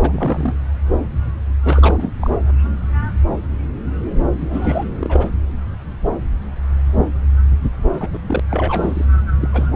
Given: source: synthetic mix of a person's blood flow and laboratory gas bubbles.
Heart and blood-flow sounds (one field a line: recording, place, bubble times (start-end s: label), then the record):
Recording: Doppler ultrasound of blood flow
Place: subclavian vein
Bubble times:
0.00-0.56 s: bubbles
1.64-2.11 s: bubbles
2.20-2.31 s: bubbles
4.39-4.85 s: bubbles
4.97-5.29 s: bubbles
8.00-8.10 s: bubbles
8.12-8.20 s: bubbles
8.28-8.40 s: bubbles
8.51-9.05 s: bubbles
9.40-9.67 s: bubbles
From the record:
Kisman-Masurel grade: 222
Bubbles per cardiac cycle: several, 3 to 8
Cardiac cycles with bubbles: 10 to 50%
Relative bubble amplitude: moderate (0.250 to 0.450)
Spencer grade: 2 (many but less than half of the cardiac periods contain bubble signals, singularly or in groups)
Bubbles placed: anywhere in the cardiac cycle